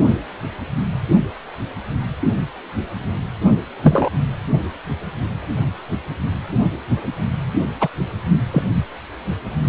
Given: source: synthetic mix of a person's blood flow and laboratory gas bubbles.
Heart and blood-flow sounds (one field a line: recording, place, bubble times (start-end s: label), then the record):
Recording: Doppler ultrasound of blood flow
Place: precordium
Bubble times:
3.83-4.09 s: bubbles
7.80-7.88 s: bubbles
8.51-8.63 s: bubbles
From the record:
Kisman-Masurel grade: 123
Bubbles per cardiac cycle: 1 to 2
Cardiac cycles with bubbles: 10 to 50%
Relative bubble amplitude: loud (0.450 to 0.775)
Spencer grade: 2 (many but less than half of the cardiac periods contain bubble signals, singularly or in groups)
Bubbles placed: only in the low amplitude regions of the cardiac cycle